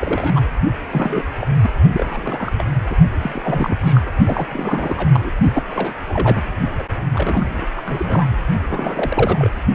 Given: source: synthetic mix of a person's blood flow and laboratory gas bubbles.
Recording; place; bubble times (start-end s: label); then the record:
Doppler ultrasound of blood flow; precordium
0.00-0.41 s: bubbles
0.89-1.23 s: bubbles
1.41-1.47 s: bubbles
1.61-1.71 s: bubbles
1.92-2.52 s: bubbles
2.58-2.65 s: bubbles
2.90-2.96 s: bubbles
3.20-3.78 s: bubbles
3.81-4.02 s: bubbles
4.05-4.12 s: bubbles
4.24-4.47 s: bubbles
4.49-5.10 s: bubbles
5.12-5.31 s: bubbles
5.53-5.94 s: bubbles
6.08-6.46 s: bubbles
6.77-6.84 s: bubbles
7.13-7.67 s: bubbles
7.76-7.81 s: bubbles
7.84-8.38 s: bubbles
8.69-9.49 s: bubbles
From the record:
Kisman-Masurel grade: 342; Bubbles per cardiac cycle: rolling drumbeat, 9 or more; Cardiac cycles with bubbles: 100%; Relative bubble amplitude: moderate (0.250 to 0.450); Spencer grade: 3 (all of the cardiac periods contain showers or single bubble signals, but not dominating or overriding the cardiac motion signals); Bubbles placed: only in the low amplitude regions of the cardiac cycle